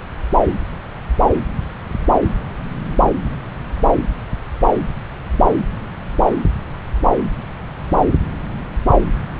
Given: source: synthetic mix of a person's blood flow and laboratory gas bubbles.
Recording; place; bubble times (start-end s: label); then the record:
Doppler ultrasound of blood flow; subclavian vein
no bubbles
From the record:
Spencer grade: 0 (complete lack of bubble signals)